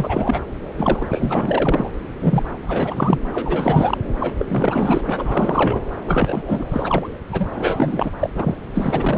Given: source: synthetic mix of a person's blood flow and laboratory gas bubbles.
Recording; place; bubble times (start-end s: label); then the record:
Doppler ultrasound of blood flow; subclavian vein
0.00-0.40 s: bubbles
0.78-1.07 s: bubbles
1.11-1.90 s: bubbles
2.20-2.43 s: bubbles
2.61-3.18 s: bubbles
3.32-3.98 s: bubbles
4.20-4.33 s: bubbles
4.38-5.01 s: bubbles
5.06-5.82 s: bubbles
6.05-7.09 s: bubbles
7.31-8.10 s: bubbles
8.20-8.29 s: bubbles
8.35-8.57 s: bubbles
8.74-9.18 s: bubbles
From the record:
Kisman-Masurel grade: 444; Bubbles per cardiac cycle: continuous sound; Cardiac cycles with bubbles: 100%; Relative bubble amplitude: maximal (0.775 to 0.999); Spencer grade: 4 (maximum detectable bubble signal sounding continuously throughout systole and diastole of every cardiac period, and overriding the amplitude of the normal cardiac signals); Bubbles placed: anywhere in the cardiac cycle